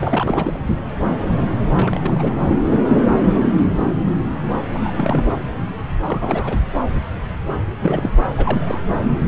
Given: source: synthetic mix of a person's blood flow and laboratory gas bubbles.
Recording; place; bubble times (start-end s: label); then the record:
Doppler ultrasound of blood flow; subclavian vein
0.00-0.57 s: bubbles
1.71-2.35 s: bubbles
4.73-4.92 s: bubbles
4.97-5.23 s: bubbles
6.02-6.56 s: bubbles
7.80-8.09 s: bubbles
8.38-8.79 s: bubbles
From the record:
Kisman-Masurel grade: 222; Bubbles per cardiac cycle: several, 3 to 8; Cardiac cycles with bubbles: 10 to 50%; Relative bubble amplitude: moderate (0.250 to 0.450); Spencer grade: 2 (many but less than half of the cardiac periods contain bubble signals, singularly or in groups); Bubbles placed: anywhere in the cardiac cycle